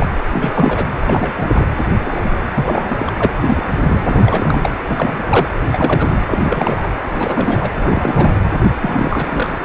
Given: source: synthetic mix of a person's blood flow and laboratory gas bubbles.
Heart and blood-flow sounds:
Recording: Doppler ultrasound of blood flow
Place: precordium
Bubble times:
0.00-0.10 s: bubbles
0.31-0.87 s: bubbles
1.06-1.67 s: bubbles
2.05-2.38 s: bubbles
2.55-3.12 s: bubbles
3.19-3.31 s: bubbles
3.41-3.63 s: bubbles
3.86-4.60 s: bubbles
4.63-4.70 s: bubbles
4.90-5.17 s: bubbles
5.29-5.49 s: bubbles
5.71-6.17 s: bubbles
6.30-6.89 s: bubbles
7.14-8.41 s: bubbles
8.81-9.65 s: bubbles
From the record:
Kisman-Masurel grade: 342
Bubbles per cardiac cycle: rolling drumbeat, 9 or more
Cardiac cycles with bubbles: 100%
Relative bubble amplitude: moderate (0.250 to 0.450)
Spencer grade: 3 (all of the cardiac periods contain showers or single bubble signals, but not dominating or overriding the cardiac motion signals)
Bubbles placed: anywhere in the cardiac cycle

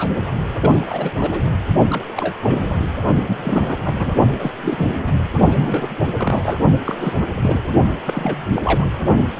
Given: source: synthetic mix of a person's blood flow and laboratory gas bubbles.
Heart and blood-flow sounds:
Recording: Doppler ultrasound of blood flow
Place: precordium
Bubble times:
0.00-0.15 s: bubbles
0.58-1.10 s: bubbles
1.18-1.50 s: bubbles
1.90-2.05 s: bubbles
2.17-2.33 s: bubbles
2.43-2.89 s: bubbles
3.26-3.80 s: bubbles
3.85-4.16 s: bubbles
4.39-4.52 s: bubbles
4.62-4.97 s: bubbles
5.07-5.12 s: bubbles
5.50-5.89 s: bubbles
6.18-6.62 s: bubbles
6.85-7.27 s: bubbles
7.41-7.68 s: bubbles
8.04-8.38 s: bubbles
8.54-8.87 s: bubbles
9.36-9.40 s: bubbles
From the record:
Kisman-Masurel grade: 342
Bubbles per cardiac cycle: rolling drumbeat, 9 or more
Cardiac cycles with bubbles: 100%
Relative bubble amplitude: moderate (0.250 to 0.450)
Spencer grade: 3 (all of the cardiac periods contain showers or single bubble signals, but not dominating or overriding the cardiac motion signals)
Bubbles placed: only in the low amplitude regions of the cardiac cycle

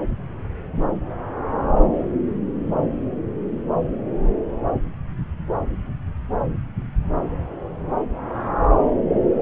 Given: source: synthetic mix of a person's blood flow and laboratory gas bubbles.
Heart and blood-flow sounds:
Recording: Doppler ultrasound of blood flow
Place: subclavian vein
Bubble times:
no bubbles
From the record:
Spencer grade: 0 (complete lack of bubble signals)

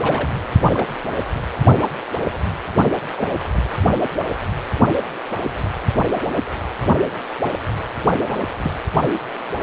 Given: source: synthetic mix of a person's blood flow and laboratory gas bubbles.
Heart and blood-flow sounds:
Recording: Doppler ultrasound of blood flow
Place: precordium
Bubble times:
0.01-0.30 s: bubbles
0.73-0.86 s: bubbles
3.17-3.41 s: bubbles
8.62-8.72 s: bubbles
From the record:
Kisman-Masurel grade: 121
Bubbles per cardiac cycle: 1 to 2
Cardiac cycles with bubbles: 10 to 50%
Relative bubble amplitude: barely perceptible (0.100 to 0.250)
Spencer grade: 2 (many but less than half of the cardiac periods contain bubble signals, singularly or in groups)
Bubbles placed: anywhere in the cardiac cycle

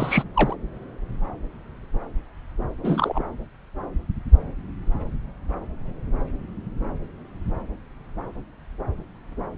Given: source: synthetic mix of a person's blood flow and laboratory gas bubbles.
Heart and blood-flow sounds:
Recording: Doppler ultrasound of blood flow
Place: subclavian vein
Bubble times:
0.00-0.23 s: bubbles
0.34-0.55 s: bubbles
2.83-3.23 s: bubbles
From the record:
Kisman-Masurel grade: 212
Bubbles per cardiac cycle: several, 3 to 8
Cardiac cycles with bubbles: 1 to 10%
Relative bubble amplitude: moderate (0.250 to 0.450)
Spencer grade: 1 (occasional bubble signal discernible with the cardiac motion signal, with majority of cardiac periods free of bubbles)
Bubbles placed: anywhere in the cardiac cycle

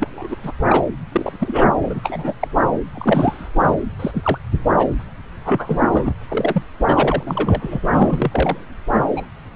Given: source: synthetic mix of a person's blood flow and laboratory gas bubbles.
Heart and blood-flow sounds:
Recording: Doppler ultrasound of blood flow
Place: subclavian vein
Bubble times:
0.00-0.35 s: bubbles
0.43-0.52 s: bubbles
0.69-0.85 s: bubbles
1.11-1.69 s: bubbles
1.82-2.00 s: bubbles
2.02-2.33 s: bubbles
2.40-2.48 s: bubbles
2.94-3.48 s: bubbles
3.63-3.75 s: bubbles
3.99-4.11 s: bubbles
4.13-4.38 s: bubbles
4.76-4.87 s: bubbles
5.45-5.83 s: bubbles
5.91-6.13 s: bubbles
6.29-6.62 s: bubbles
6.89-7.79 s: bubbles
7.86-8.64 s: bubbles
9.16-9.25 s: bubbles
From the record:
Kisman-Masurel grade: 242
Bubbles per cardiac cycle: several, 3 to 8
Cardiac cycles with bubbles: 100%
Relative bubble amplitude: moderate (0.250 to 0.450)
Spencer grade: 3 (all of the cardiac periods contain showers or single bubble signals, but not dominating or overriding the cardiac motion signals)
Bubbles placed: anywhere in the cardiac cycle

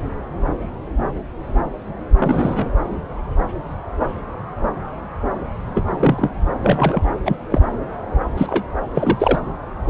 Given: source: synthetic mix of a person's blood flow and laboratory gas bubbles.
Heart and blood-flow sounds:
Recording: Doppler ultrasound of blood flow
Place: subclavian vein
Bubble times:
2.19-2.70 s: bubbles
5.75-6.29 s: bubbles
6.64-7.03 s: bubbles
7.25-7.36 s: bubbles
7.50-7.60 s: bubbles
8.38-8.64 s: bubbles
8.95-9.39 s: bubbles
From the record:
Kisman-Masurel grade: 223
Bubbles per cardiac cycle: several, 3 to 8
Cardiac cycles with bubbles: 10 to 50%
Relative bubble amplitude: loud (0.450 to 0.775)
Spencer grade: 2 (many but less than half of the cardiac periods contain bubble signals, singularly or in groups)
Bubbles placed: anywhere in the cardiac cycle

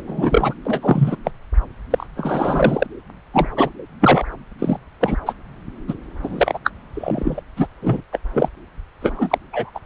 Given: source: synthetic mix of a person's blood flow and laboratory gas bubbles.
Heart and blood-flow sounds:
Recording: Doppler ultrasound of blood flow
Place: subclavian vein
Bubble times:
0.00-0.03 s: bubbles
0.07-0.54 s: bubbles
0.65-1.16 s: bubbles
1.24-1.31 s: bubbles
1.90-2.06 s: bubbles
2.17-2.87 s: bubbles
3.33-3.49 s: bubbles
3.56-3.70 s: bubbles
4.00-4.23 s: bubbles
4.58-4.78 s: bubbles
5.00-5.16 s: bubbles
5.25-5.34 s: bubbles
5.88-5.94 s: bubbles
6.23-6.58 s: bubbles
6.63-6.71 s: bubbles
6.94-7.42 s: bubbles
7.57-7.67 s: bubbles
7.82-8.02 s: bubbles
8.12-8.19 s: bubbles
8.33-8.48 s: bubbles
9.01-9.38 s: bubbles
9.53-9.70 s: bubbles
9.75-9.79 s: bubbles
From the record:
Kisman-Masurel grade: 243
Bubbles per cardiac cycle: several, 3 to 8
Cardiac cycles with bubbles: 100%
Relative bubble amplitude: loud (0.450 to 0.775)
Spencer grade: 3 (all of the cardiac periods contain showers or single bubble signals, but not dominating or overriding the cardiac motion signals)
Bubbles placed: anywhere in the cardiac cycle

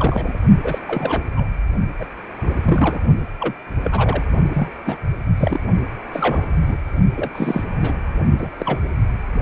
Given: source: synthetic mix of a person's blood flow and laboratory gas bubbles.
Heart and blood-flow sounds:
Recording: Doppler ultrasound of blood flow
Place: precordium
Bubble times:
0.00-0.38 s: bubbles
0.64-0.79 s: bubbles
0.87-1.22 s: bubbles
1.37-1.48 s: bubbles
2.00-2.05 s: bubbles
2.43-2.54 s: bubbles
2.65-3.00 s: bubbles
3.40-3.54 s: bubbles
3.84-4.24 s: bubbles
4.53-4.70 s: bubbles
4.86-4.97 s: bubbles
5.38-5.60 s: bubbles
6.12-6.42 s: bubbles
6.60-6.77 s: bubbles
7.15-7.63 s: bubbles
7.81-7.93 s: bubbles
8.38-8.48 s: bubbles
8.60-8.79 s: bubbles
From the record:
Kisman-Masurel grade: 242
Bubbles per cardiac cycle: several, 3 to 8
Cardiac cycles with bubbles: 100%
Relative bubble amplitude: moderate (0.250 to 0.450)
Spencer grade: 3 (all of the cardiac periods contain showers or single bubble signals, but not dominating or overriding the cardiac motion signals)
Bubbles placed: only in the low amplitude regions of the cardiac cycle

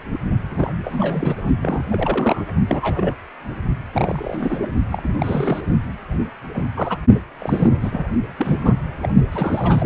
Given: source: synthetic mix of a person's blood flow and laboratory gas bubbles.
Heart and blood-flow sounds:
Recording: Doppler ultrasound of blood flow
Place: precordium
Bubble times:
0.12-0.17 s: bubbles
0.49-0.72 s: bubbles
0.84-1.36 s: bubbles
1.62-1.83 s: bubbles
1.89-2.45 s: bubbles
2.68-3.16 s: bubbles
3.92-4.67 s: bubbles
4.91-5.08 s: bubbles
5.18-5.61 s: bubbles
6.53-6.65 s: bubbles
6.76-6.97 s: bubbles
7.38-8.05 s: bubbles
8.37-8.75 s: bubbles
9.03-9.08 s: bubbles
9.32-9.86 s: bubbles
From the record:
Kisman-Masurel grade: 242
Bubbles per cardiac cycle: several, 3 to 8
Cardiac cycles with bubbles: 100%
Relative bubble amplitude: moderate (0.250 to 0.450)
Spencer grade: 3 (all of the cardiac periods contain showers or single bubble signals, but not dominating or overriding the cardiac motion signals)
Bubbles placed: only in the low amplitude regions of the cardiac cycle

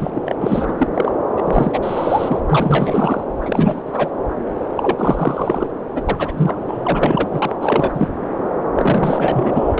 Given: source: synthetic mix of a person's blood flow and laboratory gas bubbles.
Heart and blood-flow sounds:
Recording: Doppler ultrasound of blood flow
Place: subclavian vein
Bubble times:
0.00-0.11 s: bubbles
0.14-0.22 s: bubbles
0.26-0.35 s: bubbles
0.41-0.88 s: bubbles
0.94-1.12 s: bubbles
1.36-1.78 s: bubbles
1.81-2.41 s: bubbles
2.46-3.24 s: bubbles
3.42-3.82 s: bubbles
3.85-4.12 s: bubbles
4.76-5.67 s: bubbles
5.95-6.02 s: bubbles
6.08-6.62 s: bubbles
6.67-7.28 s: bubbles
7.30-7.56 s: bubbles
7.61-8.08 s: bubbles
8.76-9.80 s: bubbles
From the record:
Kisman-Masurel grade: 343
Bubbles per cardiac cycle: rolling drumbeat, 9 or more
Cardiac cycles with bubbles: 100%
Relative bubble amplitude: loud (0.450 to 0.775)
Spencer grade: 3 (all of the cardiac periods contain showers or single bubble signals, but not dominating or overriding the cardiac motion signals)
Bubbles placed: anywhere in the cardiac cycle

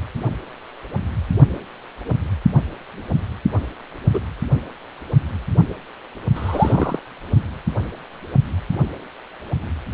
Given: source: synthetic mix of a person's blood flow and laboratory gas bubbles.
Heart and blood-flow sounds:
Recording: Doppler ultrasound of blood flow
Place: precordium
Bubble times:
4.13-4.20 s: bubbles
6.35-7.00 s: bubbles
From the record:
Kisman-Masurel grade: 122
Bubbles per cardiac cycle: 1 to 2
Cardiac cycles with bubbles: 10 to 50%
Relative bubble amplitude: moderate (0.250 to 0.450)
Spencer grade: 2 (many but less than half of the cardiac periods contain bubble signals, singularly or in groups)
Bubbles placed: only in the low amplitude regions of the cardiac cycle

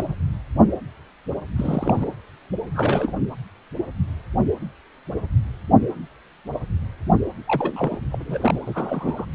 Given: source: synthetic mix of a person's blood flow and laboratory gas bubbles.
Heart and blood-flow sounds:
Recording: Doppler ultrasound of blood flow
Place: precordium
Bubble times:
0.00-0.13 s: bubbles
1.56-2.08 s: bubbles
2.74-3.12 s: bubbles
7.46-7.98 s: bubbles
8.12-8.60 s: bubbles
8.65-9.25 s: bubbles
From the record:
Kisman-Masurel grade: 222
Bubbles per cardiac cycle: several, 3 to 8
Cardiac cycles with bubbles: 10 to 50%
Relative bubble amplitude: moderate (0.250 to 0.450)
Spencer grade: 2 (many but less than half of the cardiac periods contain bubble signals, singularly or in groups)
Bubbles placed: anywhere in the cardiac cycle

